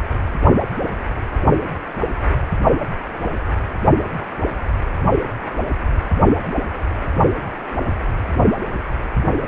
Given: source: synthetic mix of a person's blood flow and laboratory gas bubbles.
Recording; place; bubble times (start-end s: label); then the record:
Doppler ultrasound of blood flow; precordium
no bubbles
From the record:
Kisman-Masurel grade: 000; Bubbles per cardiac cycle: 0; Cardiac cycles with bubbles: 0%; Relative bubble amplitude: no bubbles discernible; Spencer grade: 0 (complete lack of bubble signals)